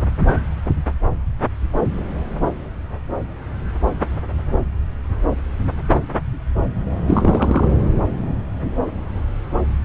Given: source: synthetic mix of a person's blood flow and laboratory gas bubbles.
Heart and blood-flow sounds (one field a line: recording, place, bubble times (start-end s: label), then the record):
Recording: Doppler ultrasound of blood flow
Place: subclavian vein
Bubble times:
7.07-7.67 s: bubbles
From the record:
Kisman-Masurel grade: 213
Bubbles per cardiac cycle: several, 3 to 8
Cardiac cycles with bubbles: 1 to 10%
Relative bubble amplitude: loud (0.450 to 0.775)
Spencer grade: 1 (occasional bubble signal discernible with the cardiac motion signal, with majority of cardiac periods free of bubbles)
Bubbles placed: anywhere in the cardiac cycle